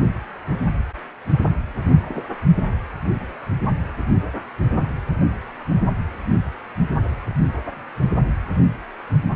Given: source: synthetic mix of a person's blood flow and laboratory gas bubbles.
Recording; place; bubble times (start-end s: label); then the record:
Doppler ultrasound of blood flow; precordium
2.02-2.22 s: bubbles
From the record:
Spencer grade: 1 (occasional bubble signal discernible with the cardiac motion signal, with majority of cardiac periods free of bubbles); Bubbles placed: anywhere in the cardiac cycle